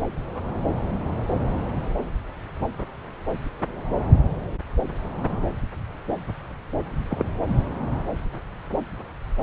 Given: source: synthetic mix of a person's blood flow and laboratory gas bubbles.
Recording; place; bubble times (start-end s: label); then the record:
Doppler ultrasound of blood flow; subclavian vein
7.10-7.24 s: bubbles
From the record:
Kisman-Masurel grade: 112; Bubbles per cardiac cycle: 1 to 2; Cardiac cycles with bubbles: 1 to 10%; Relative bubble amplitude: moderate (0.250 to 0.450); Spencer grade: 1 (occasional bubble signal discernible with the cardiac motion signal, with majority of cardiac periods free of bubbles); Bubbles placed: anywhere in the cardiac cycle